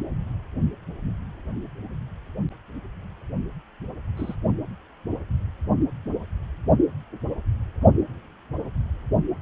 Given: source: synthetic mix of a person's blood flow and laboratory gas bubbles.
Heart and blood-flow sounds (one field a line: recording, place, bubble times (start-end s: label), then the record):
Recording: Doppler ultrasound of blood flow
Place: precordium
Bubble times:
4.16-4.35 s: bubbles
From the record:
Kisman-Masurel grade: 111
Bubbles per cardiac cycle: 1 to 2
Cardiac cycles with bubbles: 1 to 10%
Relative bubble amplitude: barely perceptible (0.100 to 0.250)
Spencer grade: 1 (occasional bubble signal discernible with the cardiac motion signal, with majority of cardiac periods free of bubbles)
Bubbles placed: only in the low amplitude regions of the cardiac cycle